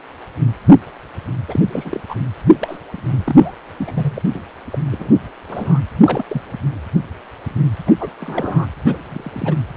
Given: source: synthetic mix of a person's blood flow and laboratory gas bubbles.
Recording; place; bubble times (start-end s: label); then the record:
Doppler ultrasound of blood flow; precordium
1.48-1.60 s: bubbles
1.73-2.00 s: bubbles
2.08-2.16 s: bubbles
2.49-2.78 s: bubbles
2.92-3.54 s: bubbles
3.77-4.22 s: bubbles
4.34-4.42 s: bubbles
4.71-4.79 s: bubbles
4.91-5.18 s: bubbles
5.29-5.31 s: bubbles
5.48-5.80 s: bubbles
6.03-6.25 s: bubbles
6.29-6.42 s: bubbles
7.87-7.92 s: bubbles
8.00-8.12 s: bubbles
8.20-8.66 s: bubbles
8.85-8.97 s: bubbles
9.09-9.55 s: bubbles
From the record:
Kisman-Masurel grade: 232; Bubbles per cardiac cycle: several, 3 to 8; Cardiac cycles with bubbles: 50 to 99%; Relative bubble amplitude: moderate (0.250 to 0.450); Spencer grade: 3 (all of the cardiac periods contain showers or single bubble signals, but not dominating or overriding the cardiac motion signals); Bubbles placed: anywhere in the cardiac cycle